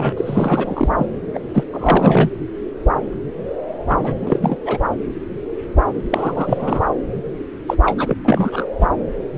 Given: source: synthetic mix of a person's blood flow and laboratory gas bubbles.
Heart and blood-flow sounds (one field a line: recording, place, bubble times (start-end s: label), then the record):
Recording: Doppler ultrasound of blood flow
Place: subclavian vein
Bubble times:
0.00-0.13 s: bubbles
0.17-0.89 s: bubbles
0.97-1.07 s: bubbles
1.32-1.41 s: bubbles
1.54-1.64 s: bubbles
1.73-2.30 s: bubbles
3.88-4.58 s: bubbles
4.65-4.78 s: bubbles
6.09-6.83 s: bubbles
7.67-7.76 s: bubbles
7.83-8.17 s: bubbles
8.23-8.65 s: bubbles
8.81-8.87 s: bubbles
From the record:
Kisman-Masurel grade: 333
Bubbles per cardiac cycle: rolling drumbeat, 9 or more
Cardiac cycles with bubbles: 50 to 99%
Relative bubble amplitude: loud (0.450 to 0.775)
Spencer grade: 3 (all of the cardiac periods contain showers or single bubble signals, but not dominating or overriding the cardiac motion signals)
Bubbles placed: anywhere in the cardiac cycle